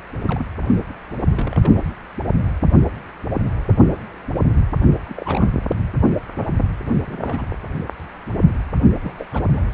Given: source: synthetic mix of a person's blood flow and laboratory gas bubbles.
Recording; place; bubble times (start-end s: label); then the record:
Doppler ultrasound of blood flow; precordium
0.26-0.45 s: bubbles
0.61-0.82 s: bubbles
1.29-1.92 s: bubbles
5.05-5.48 s: bubbles
6.91-7.02 s: bubbles
7.06-7.48 s: bubbles
9.04-9.13 s: bubbles
9.18-9.26 s: bubbles
9.31-9.44 s: bubbles
9.57-9.61 s: bubbles
From the record:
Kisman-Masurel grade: 221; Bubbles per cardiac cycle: several, 3 to 8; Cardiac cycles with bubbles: 10 to 50%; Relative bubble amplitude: barely perceptible (0.100 to 0.250); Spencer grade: 2 (many but less than half of the cardiac periods contain bubble signals, singularly or in groups); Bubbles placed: anywhere in the cardiac cycle